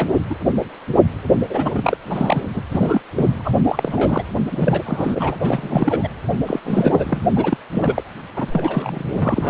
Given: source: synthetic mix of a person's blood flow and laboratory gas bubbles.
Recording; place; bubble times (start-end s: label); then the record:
Doppler ultrasound of blood flow; precordium
0.00-0.12 s: bubbles
0.30-0.34 s: bubbles
1.50-1.98 s: bubbles
2.06-2.40 s: bubbles
2.54-2.62 s: bubbles
2.71-3.01 s: bubbles
3.15-3.53 s: bubbles
3.67-4.22 s: bubbles
4.51-5.36 s: bubbles
5.44-6.08 s: bubbles
6.46-6.59 s: bubbles
6.65-7.26 s: bubbles
7.35-7.57 s: bubbles
7.72-8.04 s: bubbles
8.36-9.50 s: bubbles
From the record:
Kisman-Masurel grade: 332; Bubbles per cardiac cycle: rolling drumbeat, 9 or more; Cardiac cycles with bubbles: 50 to 99%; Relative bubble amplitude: moderate (0.250 to 0.450); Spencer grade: 3 (all of the cardiac periods contain showers or single bubble signals, but not dominating or overriding the cardiac motion signals); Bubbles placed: anywhere in the cardiac cycle